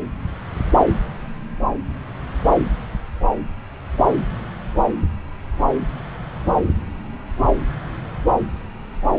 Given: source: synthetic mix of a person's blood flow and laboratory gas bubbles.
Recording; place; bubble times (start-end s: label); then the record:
Doppler ultrasound of blood flow; subclavian vein
no bubbles
From the record:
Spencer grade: 0 (complete lack of bubble signals)